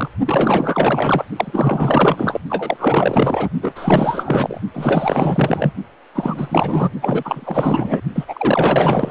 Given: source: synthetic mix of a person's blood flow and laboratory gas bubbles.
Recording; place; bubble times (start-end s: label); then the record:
Doppler ultrasound of blood flow; precordium
0.00-0.10 s: bubbles
0.25-1.25 s: bubbles
1.36-2.39 s: bubbles
2.49-3.49 s: bubbles
3.62-4.60 s: bubbles
4.73-5.72 s: bubbles
6.14-6.91 s: bubbles
7.01-8.00 s: bubbles
8.14-8.24 s: bubbles
8.28-9.11 s: bubbles
From the record:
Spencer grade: 4 (maximum detectable bubble signal sounding continuously throughout systole and diastole of every cardiac period, and overriding the amplitude of the normal cardiac signals); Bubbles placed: only in the low amplitude regions of the cardiac cycle